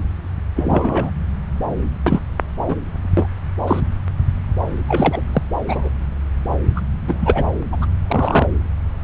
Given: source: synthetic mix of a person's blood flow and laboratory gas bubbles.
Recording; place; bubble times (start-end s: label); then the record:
Doppler ultrasound of blood flow; subclavian vein
0.56-1.11 s: bubbles
2.05-2.21 s: bubbles
2.68-2.75 s: bubbles
3.17-3.26 s: bubbles
3.67-3.80 s: bubbles
4.88-5.21 s: bubbles
5.33-5.42 s: bubbles
5.67-5.89 s: bubbles
6.75-6.81 s: bubbles
7.07-7.43 s: bubbles
7.71-7.86 s: bubbles
8.07-8.47 s: bubbles
From the record:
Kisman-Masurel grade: 243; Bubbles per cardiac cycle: several, 3 to 8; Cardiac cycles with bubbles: 100%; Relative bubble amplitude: loud (0.450 to 0.775); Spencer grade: 3 (all of the cardiac periods contain showers or single bubble signals, but not dominating or overriding the cardiac motion signals); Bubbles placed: anywhere in the cardiac cycle